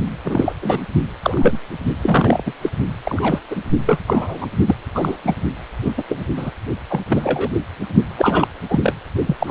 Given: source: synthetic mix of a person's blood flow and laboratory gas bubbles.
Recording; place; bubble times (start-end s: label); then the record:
Doppler ultrasound of blood flow; precordium
0.24-0.53 s: bubbles
0.61-0.81 s: bubbles
1.22-1.59 s: bubbles
2.02-2.42 s: bubbles
2.45-2.52 s: bubbles
2.62-2.70 s: bubbles
3.05-3.40 s: bubbles
3.50-3.62 s: bubbles
3.87-3.98 s: bubbles
4.07-4.48 s: bubbles
4.66-4.75 s: bubbles
4.94-5.17 s: bubbles
5.24-5.35 s: bubbles
5.84-5.92 s: bubbles
5.97-6.03 s: bubbles
6.08-6.25 s: bubbles
6.36-6.50 s: bubbles
6.88-7.00 s: bubbles
7.09-7.50 s: bubbles
8.18-8.48 s: bubbles
8.69-8.94 s: bubbles
9.26-9.36 s: bubbles
9.39-9.51 s: bubbles
From the record:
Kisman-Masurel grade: 243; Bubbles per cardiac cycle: several, 3 to 8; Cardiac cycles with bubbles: 100%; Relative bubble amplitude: loud (0.450 to 0.775); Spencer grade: 3 (all of the cardiac periods contain showers or single bubble signals, but not dominating or overriding the cardiac motion signals); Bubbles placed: only in the low amplitude regions of the cardiac cycle